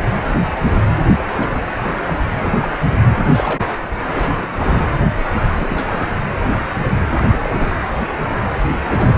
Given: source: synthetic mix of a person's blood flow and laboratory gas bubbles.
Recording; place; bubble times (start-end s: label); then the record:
Doppler ultrasound of blood flow; precordium
1.17-1.29 s: bubbles
1.40-1.49 s: bubbles
1.53-1.80 s: bubbles
1.84-1.96 s: bubbles
2.04-2.14 s: bubbles
2.35-2.73 s: bubbles
3.19-3.60 s: bubbles
4.14-4.49 s: bubbles
4.58-4.82 s: bubbles
5.54-6.06 s: bubbles
7.14-7.23 s: bubbles
7.29-7.38 s: bubbles
7.42-7.73 s: bubbles
8.84-9.18 s: bubbles
From the record:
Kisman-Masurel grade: 221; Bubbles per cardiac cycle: several, 3 to 8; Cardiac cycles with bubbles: 10 to 50%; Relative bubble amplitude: barely perceptible (0.100 to 0.250); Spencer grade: 2 (many but less than half of the cardiac periods contain bubble signals, singularly or in groups); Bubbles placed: anywhere in the cardiac cycle